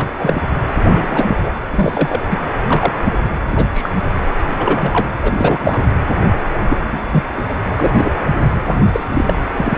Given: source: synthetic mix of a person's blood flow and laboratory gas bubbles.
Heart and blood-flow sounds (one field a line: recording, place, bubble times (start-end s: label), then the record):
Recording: Doppler ultrasound of blood flow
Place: precordium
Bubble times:
0.00-0.09 s: bubbles
0.19-0.43 s: bubbles
0.84-1.50 s: bubbles
1.72-2.21 s: bubbles
2.29-2.38 s: bubbles
2.66-2.92 s: bubbles
3.04-3.12 s: bubbles
3.48-3.67 s: bubbles
3.72-3.90 s: bubbles
4.58-5.10 s: bubbles
5.23-5.87 s: bubbles
6.70-6.77 s: bubbles
6.92-7.06 s: bubbles
7.11-7.24 s: bubbles
7.37-7.43 s: bubbles
7.49-7.54 s: bubbles
7.71-7.74 s: bubbles
7.77-8.13 s: bubbles
8.43-9.04 s: bubbles
9.12-9.39 s: bubbles
9.56-9.78 s: bubbles
From the record:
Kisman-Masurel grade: 243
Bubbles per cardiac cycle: several, 3 to 8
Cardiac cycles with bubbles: 100%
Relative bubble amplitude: loud (0.450 to 0.775)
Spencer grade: 3 (all of the cardiac periods contain showers or single bubble signals, but not dominating or overriding the cardiac motion signals)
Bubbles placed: anywhere in the cardiac cycle